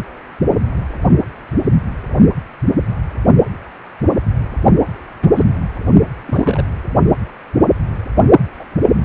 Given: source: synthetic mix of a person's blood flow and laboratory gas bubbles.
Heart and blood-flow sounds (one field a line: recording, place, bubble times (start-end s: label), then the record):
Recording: Doppler ultrasound of blood flow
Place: precordium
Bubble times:
5.21-5.44 s: bubbles
6.26-6.65 s: bubbles
8.59-8.64 s: bubbles
From the record:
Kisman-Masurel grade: 122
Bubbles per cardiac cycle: 1 to 2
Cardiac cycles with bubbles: 10 to 50%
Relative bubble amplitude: moderate (0.250 to 0.450)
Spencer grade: 2 (many but less than half of the cardiac periods contain bubble signals, singularly or in groups)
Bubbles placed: only in the low amplitude regions of the cardiac cycle